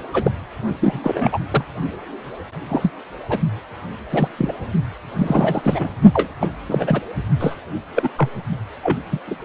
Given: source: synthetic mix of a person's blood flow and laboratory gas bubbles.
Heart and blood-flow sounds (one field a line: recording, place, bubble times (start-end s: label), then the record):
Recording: Doppler ultrasound of blood flow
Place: precordium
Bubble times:
0.13-0.32 s: bubbles
0.80-1.00 s: bubbles
1.03-1.38 s: bubbles
1.51-1.65 s: bubbles
2.68-2.90 s: bubbles
3.29-3.40 s: bubbles
4.10-4.29 s: bubbles
4.38-4.52 s: bubbles
5.17-5.91 s: bubbles
6.13-6.29 s: bubbles
6.40-6.48 s: bubbles
6.69-7.00 s: bubbles
7.39-7.56 s: bubbles
7.95-8.09 s: bubbles
8.18-8.29 s: bubbles
8.83-9.01 s: bubbles
9.12-9.20 s: bubbles
9.27-9.36 s: bubbles
From the record:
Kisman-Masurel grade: 242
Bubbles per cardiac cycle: several, 3 to 8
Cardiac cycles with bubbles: 100%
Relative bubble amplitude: moderate (0.250 to 0.450)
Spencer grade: 3 (all of the cardiac periods contain showers or single bubble signals, but not dominating or overriding the cardiac motion signals)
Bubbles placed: only in the low amplitude regions of the cardiac cycle